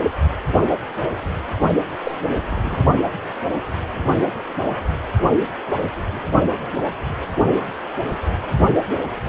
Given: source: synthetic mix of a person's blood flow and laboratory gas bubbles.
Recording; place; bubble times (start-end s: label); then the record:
Doppler ultrasound of blood flow; precordium
2.04-2.17 s: bubbles
2.50-2.85 s: bubbles
From the record:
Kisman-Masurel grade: 122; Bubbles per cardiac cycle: 1 to 2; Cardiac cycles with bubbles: 10 to 50%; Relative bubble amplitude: moderate (0.250 to 0.450); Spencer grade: 2 (many but less than half of the cardiac periods contain bubble signals, singularly or in groups); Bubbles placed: only in the low amplitude regions of the cardiac cycle